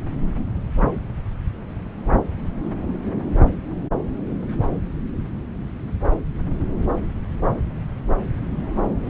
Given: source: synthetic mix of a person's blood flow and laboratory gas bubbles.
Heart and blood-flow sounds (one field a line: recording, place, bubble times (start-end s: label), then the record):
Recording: Doppler ultrasound of blood flow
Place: subclavian vein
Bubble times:
no bubbles
From the record:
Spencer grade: 0 (complete lack of bubble signals)